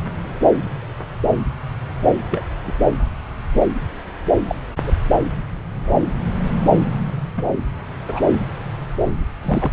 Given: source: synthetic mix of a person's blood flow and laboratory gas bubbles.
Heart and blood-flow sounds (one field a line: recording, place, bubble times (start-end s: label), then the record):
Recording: Doppler ultrasound of blood flow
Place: subclavian vein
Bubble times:
2.30-2.44 s: bubbles
2.65-2.73 s: bubbles
4.45-4.55 s: bubbles
4.85-4.92 s: bubbles
5.88-5.99 s: bubbles
7.37-7.44 s: bubbles
8.08-8.21 s: bubbles
9.43-9.72 s: bubbles
From the record:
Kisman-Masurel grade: 122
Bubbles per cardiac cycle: 1 to 2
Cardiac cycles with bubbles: 10 to 50%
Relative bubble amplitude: moderate (0.250 to 0.450)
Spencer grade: 2 (many but less than half of the cardiac periods contain bubble signals, singularly or in groups)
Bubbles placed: anywhere in the cardiac cycle